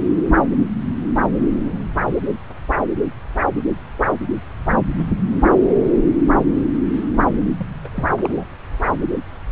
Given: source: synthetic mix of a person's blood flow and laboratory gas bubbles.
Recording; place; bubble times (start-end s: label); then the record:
Doppler ultrasound of blood flow; subclavian vein
7.59-7.68 s: bubbles
7.84-7.88 s: bubbles
7.94-8.07 s: bubbles
8.24-8.44 s: bubbles
From the record:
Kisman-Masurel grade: 211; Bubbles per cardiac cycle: several, 3 to 8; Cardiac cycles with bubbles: 1 to 10%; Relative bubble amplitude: barely perceptible (0.100 to 0.250); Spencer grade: 1 (occasional bubble signal discernible with the cardiac motion signal, with majority of cardiac periods free of bubbles); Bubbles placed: anywhere in the cardiac cycle